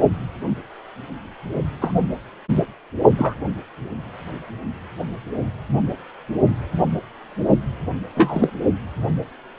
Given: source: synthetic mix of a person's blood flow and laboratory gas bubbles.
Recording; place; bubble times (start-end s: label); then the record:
Doppler ultrasound of blood flow; precordium
1.81-1.94 s: bubbles
3.17-3.35 s: bubbles
8.16-8.51 s: bubbles
From the record:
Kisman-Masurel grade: 123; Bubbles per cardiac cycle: 1 to 2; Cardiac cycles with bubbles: 10 to 50%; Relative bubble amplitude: loud (0.450 to 0.775); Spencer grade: 2 (many but less than half of the cardiac periods contain bubble signals, singularly or in groups); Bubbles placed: only in the low amplitude regions of the cardiac cycle